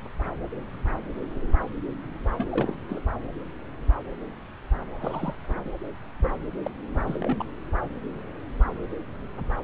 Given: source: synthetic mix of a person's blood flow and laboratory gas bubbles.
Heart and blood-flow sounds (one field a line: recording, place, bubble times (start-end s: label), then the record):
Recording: Doppler ultrasound of blood flow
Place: subclavian vein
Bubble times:
2.38-2.47 s: bubbles
2.51-2.75 s: bubbles
2.89-3.02 s: bubbles
4.99-5.35 s: bubbles
5.65-5.69 s: bubbles
6.20-6.29 s: bubbles
6.62-6.71 s: bubbles
7.07-7.18 s: bubbles
7.21-7.37 s: bubbles
7.39-7.43 s: bubbles
From the record:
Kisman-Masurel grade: 221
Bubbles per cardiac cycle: several, 3 to 8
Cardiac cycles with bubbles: 10 to 50%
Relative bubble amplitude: barely perceptible (0.100 to 0.250)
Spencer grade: 2 (many but less than half of the cardiac periods contain bubble signals, singularly or in groups)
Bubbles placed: anywhere in the cardiac cycle